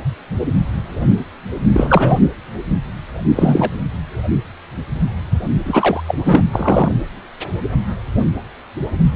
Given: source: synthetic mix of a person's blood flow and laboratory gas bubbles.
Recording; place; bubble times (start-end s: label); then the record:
Doppler ultrasound of blood flow; precordium
1.73-2.19 s: bubbles
3.35-3.71 s: bubbles
5.66-6.01 s: bubbles
6.07-6.16 s: bubbles
6.25-6.43 s: bubbles
6.51-6.92 s: bubbles
From the record:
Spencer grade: 2 (many but less than half of the cardiac periods contain bubble signals, singularly or in groups); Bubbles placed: anywhere in the cardiac cycle